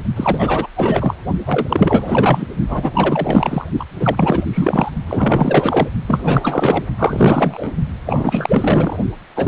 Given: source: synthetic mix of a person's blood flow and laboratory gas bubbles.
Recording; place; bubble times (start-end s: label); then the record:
Doppler ultrasound of blood flow; precordium
0.15-0.67 s: bubbles
0.76-1.14 s: bubbles
1.46-2.46 s: bubbles
2.68-2.92 s: bubbles
2.94-3.65 s: bubbles
3.79-3.85 s: bubbles
3.99-4.45 s: bubbles
4.50-4.91 s: bubbles
5.07-5.88 s: bubbles
6.08-6.85 s: bubbles
6.98-7.72 s: bubbles
8.06-8.98 s: bubbles
9.35-9.47 s: bubbles
From the record:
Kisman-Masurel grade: 444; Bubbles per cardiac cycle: continuous sound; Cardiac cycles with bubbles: 100%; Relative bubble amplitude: maximal (0.775 to 0.999); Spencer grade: 4 (maximum detectable bubble signal sounding continuously throughout systole and diastole of every cardiac period, and overriding the amplitude of the normal cardiac signals); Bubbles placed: only in the low amplitude regions of the cardiac cycle